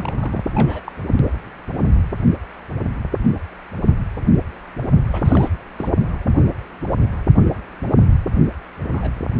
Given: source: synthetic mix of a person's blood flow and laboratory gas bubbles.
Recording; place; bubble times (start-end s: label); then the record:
Doppler ultrasound of blood flow; precordium
0.00-0.42 s: bubbles
0.51-0.80 s: bubbles
0.84-0.92 s: bubbles
5.11-5.48 s: bubbles
5.78-5.88 s: bubbles
8.91-9.09 s: bubbles
From the record:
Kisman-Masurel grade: 221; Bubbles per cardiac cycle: several, 3 to 8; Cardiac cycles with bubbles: 10 to 50%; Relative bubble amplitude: barely perceptible (0.100 to 0.250); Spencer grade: 2 (many but less than half of the cardiac periods contain bubble signals, singularly or in groups); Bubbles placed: only in the low amplitude regions of the cardiac cycle